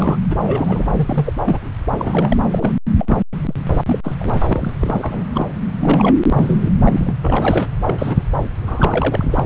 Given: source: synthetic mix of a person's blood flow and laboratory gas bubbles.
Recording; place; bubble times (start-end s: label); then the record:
Doppler ultrasound of blood flow; subclavian vein
0.00-0.18 s: bubbles
0.30-0.36 s: bubbles
0.42-0.87 s: bubbles
0.95-1.33 s: bubbles
1.45-1.60 s: bubbles
1.91-2.37 s: bubbles
2.43-2.73 s: bubbles
2.99-3.17 s: bubbles
3.42-3.54 s: bubbles
3.86-3.99 s: bubbles
4.03-4.14 s: bubbles
4.20-4.30 s: bubbles
4.33-5.25 s: bubbles
5.33-5.47 s: bubbles
5.81-6.17 s: bubbles
6.29-6.70 s: bubbles
6.81-7.13 s: bubbles
7.21-7.72 s: bubbles
7.86-8.24 s: bubbles
8.62-9.46 s: bubbles
From the record:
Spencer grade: 3 (all of the cardiac periods contain showers or single bubble signals, but not dominating or overriding the cardiac motion signals); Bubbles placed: anywhere in the cardiac cycle